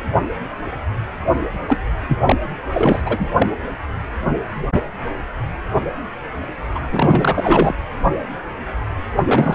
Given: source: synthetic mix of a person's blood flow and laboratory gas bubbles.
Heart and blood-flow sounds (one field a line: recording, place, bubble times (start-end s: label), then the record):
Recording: Doppler ultrasound of blood flow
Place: precordium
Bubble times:
1.68-1.78 s: bubbles
2.08-2.18 s: bubbles
2.25-2.36 s: bubbles
2.74-3.02 s: bubbles
3.05-3.30 s: bubbles
3.37-3.47 s: bubbles
6.75-6.79 s: bubbles
6.92-7.75 s: bubbles
9.15-9.23 s: bubbles
9.25-9.55 s: bubbles
From the record:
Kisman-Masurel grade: 333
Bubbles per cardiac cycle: rolling drumbeat, 9 or more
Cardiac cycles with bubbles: 50 to 99%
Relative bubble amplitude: loud (0.450 to 0.775)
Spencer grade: 3 (all of the cardiac periods contain showers or single bubble signals, but not dominating or overriding the cardiac motion signals)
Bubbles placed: anywhere in the cardiac cycle